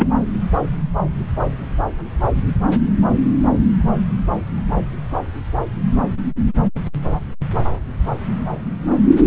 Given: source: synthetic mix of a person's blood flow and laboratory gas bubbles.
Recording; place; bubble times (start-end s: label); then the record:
Doppler ultrasound of blood flow; subclavian vein
0.00-0.07 s: bubbles
From the record:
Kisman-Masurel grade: 112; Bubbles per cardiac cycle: 1 to 2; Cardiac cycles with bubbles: 1 to 10%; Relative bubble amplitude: moderate (0.250 to 0.450); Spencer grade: 1 (occasional bubble signal discernible with the cardiac motion signal, with majority of cardiac periods free of bubbles); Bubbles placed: anywhere in the cardiac cycle